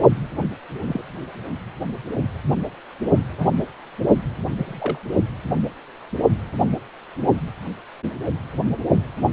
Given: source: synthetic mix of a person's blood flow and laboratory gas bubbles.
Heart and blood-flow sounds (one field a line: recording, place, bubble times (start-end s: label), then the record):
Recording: Doppler ultrasound of blood flow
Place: precordium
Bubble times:
0.87-1.02 s: bubbles
3.33-3.50 s: bubbles
4.50-4.98 s: bubbles
From the record:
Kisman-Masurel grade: 121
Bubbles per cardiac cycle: 1 to 2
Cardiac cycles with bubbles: 10 to 50%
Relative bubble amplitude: barely perceptible (0.100 to 0.250)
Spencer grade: 2 (many but less than half of the cardiac periods contain bubble signals, singularly or in groups)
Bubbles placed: only in the low amplitude regions of the cardiac cycle